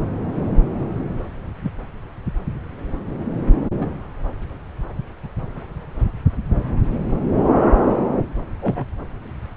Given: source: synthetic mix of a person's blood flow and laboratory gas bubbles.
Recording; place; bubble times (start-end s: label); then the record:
Doppler ultrasound of blood flow; subclavian vein
1.62-1.72 s: bubbles
3.81-3.87 s: bubbles
8.61-8.85 s: bubbles
From the record:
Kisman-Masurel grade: 122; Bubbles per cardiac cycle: 1 to 2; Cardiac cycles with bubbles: 10 to 50%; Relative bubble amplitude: moderate (0.250 to 0.450); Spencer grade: 2 (many but less than half of the cardiac periods contain bubble signals, singularly or in groups); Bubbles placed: anywhere in the cardiac cycle